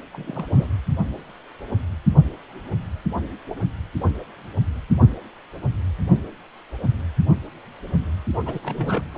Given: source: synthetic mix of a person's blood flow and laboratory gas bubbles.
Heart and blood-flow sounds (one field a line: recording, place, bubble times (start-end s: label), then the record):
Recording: Doppler ultrasound of blood flow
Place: precordium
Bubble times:
0.13-0.67 s: bubbles
8.46-8.59 s: bubbles
8.62-9.07 s: bubbles
9.13-9.18 s: bubbles
From the record:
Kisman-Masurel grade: 221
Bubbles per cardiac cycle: several, 3 to 8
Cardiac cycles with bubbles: 10 to 50%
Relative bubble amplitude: barely perceptible (0.100 to 0.250)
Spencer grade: 2 (many but less than half of the cardiac periods contain bubble signals, singularly or in groups)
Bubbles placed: only in the low amplitude regions of the cardiac cycle